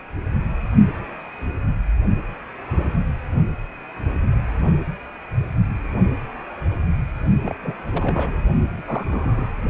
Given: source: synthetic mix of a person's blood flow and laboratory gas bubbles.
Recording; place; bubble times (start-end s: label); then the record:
Doppler ultrasound of blood flow; precordium
7.42-7.54 s: bubbles
7.62-7.75 s: bubbles
7.92-8.40 s: bubbles
8.78-8.82 s: bubbles
8.88-9.53 s: bubbles
From the record:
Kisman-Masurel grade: 221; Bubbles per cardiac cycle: several, 3 to 8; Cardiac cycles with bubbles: 10 to 50%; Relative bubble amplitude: barely perceptible (0.100 to 0.250); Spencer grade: 2 (many but less than half of the cardiac periods contain bubble signals, singularly or in groups); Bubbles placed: only in the low amplitude regions of the cardiac cycle